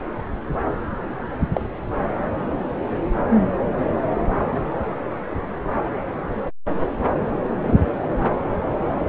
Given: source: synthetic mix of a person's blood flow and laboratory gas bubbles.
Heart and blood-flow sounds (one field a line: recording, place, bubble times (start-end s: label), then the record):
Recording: Doppler ultrasound of blood flow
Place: subclavian vein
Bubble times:
1.53-1.62 s: bubbles
4.51-4.65 s: bubbles
7.61-7.75 s: bubbles
From the record:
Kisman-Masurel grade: 122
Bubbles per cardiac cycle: 1 to 2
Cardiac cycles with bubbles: 10 to 50%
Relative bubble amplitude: moderate (0.250 to 0.450)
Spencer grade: 2 (many but less than half of the cardiac periods contain bubble signals, singularly or in groups)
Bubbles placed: anywhere in the cardiac cycle